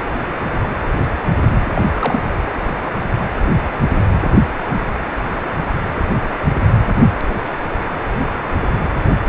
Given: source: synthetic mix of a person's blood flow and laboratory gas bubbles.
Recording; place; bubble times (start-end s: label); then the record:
Doppler ultrasound of blood flow; precordium
1.66-1.70 s: bubbles
1.75-1.82 s: bubbles
1.99-2.19 s: bubbles
From the record:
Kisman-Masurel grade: 212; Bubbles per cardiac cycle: several, 3 to 8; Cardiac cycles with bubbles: 1 to 10%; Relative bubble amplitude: moderate (0.250 to 0.450); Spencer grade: 1 (occasional bubble signal discernible with the cardiac motion signal, with majority of cardiac periods free of bubbles); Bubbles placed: anywhere in the cardiac cycle